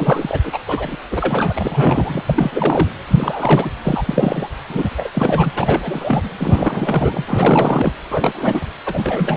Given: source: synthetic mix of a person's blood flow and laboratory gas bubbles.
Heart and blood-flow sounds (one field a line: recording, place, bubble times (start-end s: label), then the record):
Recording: Doppler ultrasound of blood flow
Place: precordium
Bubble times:
0.00-0.39 s: bubbles
0.43-0.59 s: bubbles
0.68-0.96 s: bubbles
1.11-1.53 s: bubbles
1.56-2.89 s: bubbles
3.08-3.70 s: bubbles
3.82-4.49 s: bubbles
4.68-4.89 s: bubbles
4.96-5.09 s: bubbles
5.12-5.52 s: bubbles
5.56-6.22 s: bubbles
6.38-7.25 s: bubbles
7.27-7.92 s: bubbles
8.09-8.69 s: bubbles
8.86-9.37 s: bubbles
From the record:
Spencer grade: 3 (all of the cardiac periods contain showers or single bubble signals, but not dominating or overriding the cardiac motion signals)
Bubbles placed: anywhere in the cardiac cycle